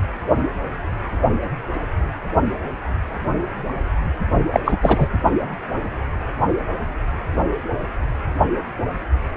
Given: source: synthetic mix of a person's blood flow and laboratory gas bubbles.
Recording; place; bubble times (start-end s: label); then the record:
Doppler ultrasound of blood flow; precordium
4.51-4.60 s: bubbles
4.65-4.77 s: bubbles
4.81-5.08 s: bubbles
From the record:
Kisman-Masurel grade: 213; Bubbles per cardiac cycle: several, 3 to 8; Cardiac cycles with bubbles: 1 to 10%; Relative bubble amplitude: loud (0.450 to 0.775); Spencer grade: 1 (occasional bubble signal discernible with the cardiac motion signal, with majority of cardiac periods free of bubbles); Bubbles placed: only in the low amplitude regions of the cardiac cycle